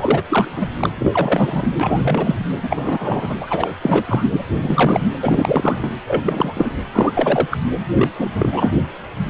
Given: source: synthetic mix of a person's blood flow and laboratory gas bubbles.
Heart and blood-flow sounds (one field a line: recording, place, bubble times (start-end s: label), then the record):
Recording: Doppler ultrasound of blood flow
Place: precordium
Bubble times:
0.00-0.22 s: bubbles
0.29-0.69 s: bubbles
0.77-0.90 s: bubbles
0.98-1.68 s: bubbles
1.80-2.35 s: bubbles
2.62-3.35 s: bubbles
3.40-3.72 s: bubbles
3.81-4.24 s: bubbles
4.31-4.45 s: bubbles
4.60-5.08 s: bubbles
5.23-5.92 s: bubbles
6.07-6.21 s: bubbles
6.25-6.72 s: bubbles
6.92-7.48 s: bubbles
7.51-7.58 s: bubbles
7.94-8.09 s: bubbles
8.18-8.71 s: bubbles
From the record:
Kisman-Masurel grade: 343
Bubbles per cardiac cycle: rolling drumbeat, 9 or more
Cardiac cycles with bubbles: 100%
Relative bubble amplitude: loud (0.450 to 0.775)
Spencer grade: 3 (all of the cardiac periods contain showers or single bubble signals, but not dominating or overriding the cardiac motion signals)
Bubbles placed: anywhere in the cardiac cycle